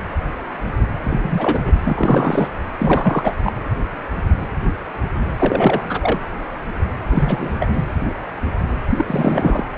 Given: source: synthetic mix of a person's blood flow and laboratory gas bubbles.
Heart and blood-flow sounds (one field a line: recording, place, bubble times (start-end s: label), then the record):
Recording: Doppler ultrasound of blood flow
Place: precordium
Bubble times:
1.03-1.78 s: bubbles
1.84-2.49 s: bubbles
2.79-3.33 s: bubbles
3.43-3.52 s: bubbles
5.36-6.19 s: bubbles
7.09-7.70 s: bubbles
7.73-7.83 s: bubbles
8.89-9.63 s: bubbles
From the record:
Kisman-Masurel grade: 333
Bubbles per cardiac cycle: rolling drumbeat, 9 or more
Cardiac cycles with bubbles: 50 to 99%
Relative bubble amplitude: loud (0.450 to 0.775)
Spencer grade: 3 (all of the cardiac periods contain showers or single bubble signals, but not dominating or overriding the cardiac motion signals)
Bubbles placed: anywhere in the cardiac cycle